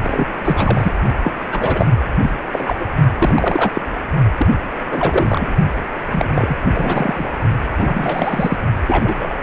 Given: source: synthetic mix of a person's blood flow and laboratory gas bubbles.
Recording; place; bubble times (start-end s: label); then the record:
Doppler ultrasound of blood flow; precordium
0.04-0.30 s: bubbles
0.44-0.92 s: bubbles
1.24-1.32 s: bubbles
1.51-1.90 s: bubbles
2.22-2.30 s: bubbles
2.52-2.76 s: bubbles
2.79-2.86 s: bubbles
3.18-3.72 s: bubbles
3.75-3.81 s: bubbles
4.37-4.47 s: bubbles
4.91-5.55 s: bubbles
6.12-6.58 s: bubbles
6.72-7.31 s: bubbles
7.77-8.56 s: bubbles
8.88-9.37 s: bubbles
From the record:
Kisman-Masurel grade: 343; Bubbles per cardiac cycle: rolling drumbeat, 9 or more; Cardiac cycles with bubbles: 100%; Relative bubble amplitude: loud (0.450 to 0.775); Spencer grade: 3 (all of the cardiac periods contain showers or single bubble signals, but not dominating or overriding the cardiac motion signals); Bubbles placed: only in the low amplitude regions of the cardiac cycle